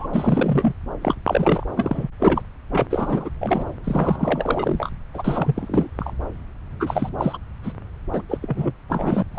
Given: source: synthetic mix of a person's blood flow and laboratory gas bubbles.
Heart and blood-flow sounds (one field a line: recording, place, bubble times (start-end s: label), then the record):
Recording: Doppler ultrasound of blood flow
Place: subclavian vein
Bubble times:
0.00-0.07 s: bubbles
0.13-0.74 s: bubbles
1.02-1.15 s: bubbles
1.25-1.65 s: bubbles
1.74-2.08 s: bubbles
2.19-2.42 s: bubbles
2.71-2.86 s: bubbles
2.90-3.29 s: bubbles
3.41-3.65 s: bubbles
3.84-4.90 s: bubbles
5.13-5.88 s: bubbles
5.99-6.13 s: bubbles
6.80-7.09 s: bubbles
7.18-7.38 s: bubbles
7.63-7.72 s: bubbles
8.13-8.22 s: bubbles
8.28-8.38 s: bubbles
8.41-8.72 s: bubbles
8.89-9.23 s: bubbles
9.34-9.39 s: bubbles
From the record:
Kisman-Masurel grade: 342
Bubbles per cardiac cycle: rolling drumbeat, 9 or more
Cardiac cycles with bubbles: 100%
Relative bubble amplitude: moderate (0.250 to 0.450)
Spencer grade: 3 (all of the cardiac periods contain showers or single bubble signals, but not dominating or overriding the cardiac motion signals)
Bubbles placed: anywhere in the cardiac cycle